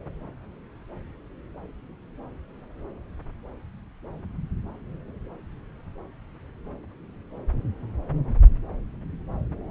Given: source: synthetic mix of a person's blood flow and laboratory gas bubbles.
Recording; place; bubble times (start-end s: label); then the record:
Doppler ultrasound of blood flow; subclavian vein
no bubbles
From the record:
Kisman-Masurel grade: 000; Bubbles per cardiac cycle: 0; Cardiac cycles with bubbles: 0%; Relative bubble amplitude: no bubbles discernible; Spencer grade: 0 (complete lack of bubble signals)